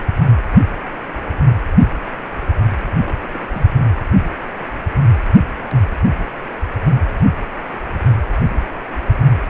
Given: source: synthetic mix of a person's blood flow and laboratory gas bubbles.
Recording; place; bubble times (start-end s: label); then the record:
Doppler ultrasound of blood flow; precordium
3.05-3.68 s: bubbles
From the record:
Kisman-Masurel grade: 211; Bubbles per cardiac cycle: several, 3 to 8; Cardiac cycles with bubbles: 1 to 10%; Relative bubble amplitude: barely perceptible (0.100 to 0.250); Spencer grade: 1 (occasional bubble signal discernible with the cardiac motion signal, with majority of cardiac periods free of bubbles); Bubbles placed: anywhere in the cardiac cycle